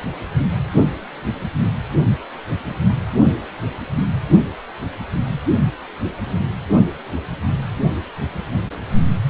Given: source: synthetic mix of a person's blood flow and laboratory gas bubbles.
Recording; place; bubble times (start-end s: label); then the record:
Doppler ultrasound of blood flow; precordium
no bubbles
From the record:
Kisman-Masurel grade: 000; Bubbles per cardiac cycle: 0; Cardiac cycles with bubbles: 0%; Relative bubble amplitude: no bubbles discernible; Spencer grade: 0 (complete lack of bubble signals)